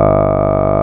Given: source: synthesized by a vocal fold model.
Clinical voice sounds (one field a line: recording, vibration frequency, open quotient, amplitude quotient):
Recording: sustained vowel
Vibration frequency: 50 Hz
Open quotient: 0.3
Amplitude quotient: 1.4